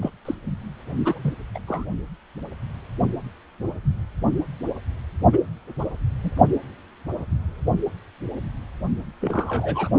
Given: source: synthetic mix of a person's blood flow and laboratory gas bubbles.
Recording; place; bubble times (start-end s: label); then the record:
Doppler ultrasound of blood flow; precordium
0.02-0.10 s: bubbles
0.25-0.35 s: bubbles
1.04-1.33 s: bubbles
1.54-1.59 s: bubbles
1.67-1.85 s: bubbles
5.33-5.38 s: bubbles
5.79-5.85 s: bubbles
6.23-6.31 s: bubbles
9.21-9.89 s: bubbles
From the record:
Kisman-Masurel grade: 221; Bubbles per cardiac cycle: several, 3 to 8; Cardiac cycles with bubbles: 10 to 50%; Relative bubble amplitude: barely perceptible (0.100 to 0.250); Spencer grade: 2 (many but less than half of the cardiac periods contain bubble signals, singularly or in groups); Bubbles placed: only in the low amplitude regions of the cardiac cycle